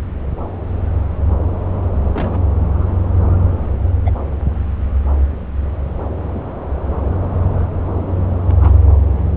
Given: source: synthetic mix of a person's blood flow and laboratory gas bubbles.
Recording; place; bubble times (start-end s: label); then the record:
Doppler ultrasound of blood flow; subclavian vein
2.13-2.42 s: bubbles
2.60-2.65 s: bubbles
2.75-3.01 s: bubbles
4.05-4.11 s: bubbles
6.21-6.43 s: bubbles
8.46-8.85 s: bubbles
From the record:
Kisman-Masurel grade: 121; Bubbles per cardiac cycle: 1 to 2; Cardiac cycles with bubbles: 10 to 50%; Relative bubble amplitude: barely perceptible (0.100 to 0.250); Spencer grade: 2 (many but less than half of the cardiac periods contain bubble signals, singularly or in groups); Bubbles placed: anywhere in the cardiac cycle